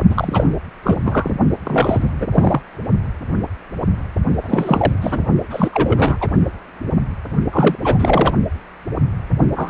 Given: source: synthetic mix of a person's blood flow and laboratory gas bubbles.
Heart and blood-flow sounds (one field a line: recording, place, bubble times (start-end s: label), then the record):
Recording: Doppler ultrasound of blood flow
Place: precordium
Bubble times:
0.09-0.47 s: bubbles
0.83-1.01 s: bubbles
1.05-1.34 s: bubbles
1.65-2.09 s: bubbles
2.20-2.26 s: bubbles
2.31-2.61 s: bubbles
4.42-4.93 s: bubbles
5.01-5.23 s: bubbles
5.50-6.17 s: bubbles
6.20-6.29 s: bubbles
7.52-7.75 s: bubbles
7.81-8.35 s: bubbles
9.56-9.70 s: bubbles
From the record:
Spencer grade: 3 (all of the cardiac periods contain showers or single bubble signals, but not dominating or overriding the cardiac motion signals)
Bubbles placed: only in the low amplitude regions of the cardiac cycle